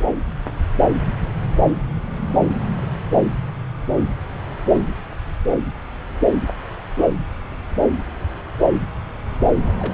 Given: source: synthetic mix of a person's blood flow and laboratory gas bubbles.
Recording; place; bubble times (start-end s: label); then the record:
Doppler ultrasound of blood flow; subclavian vein
9.66-9.72 s: bubbles
9.79-9.94 s: bubbles
From the record:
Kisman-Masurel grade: 211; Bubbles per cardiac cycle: several, 3 to 8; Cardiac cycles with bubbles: 1 to 10%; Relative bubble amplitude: barely perceptible (0.100 to 0.250); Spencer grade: 1 (occasional bubble signal discernible with the cardiac motion signal, with majority of cardiac periods free of bubbles); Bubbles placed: anywhere in the cardiac cycle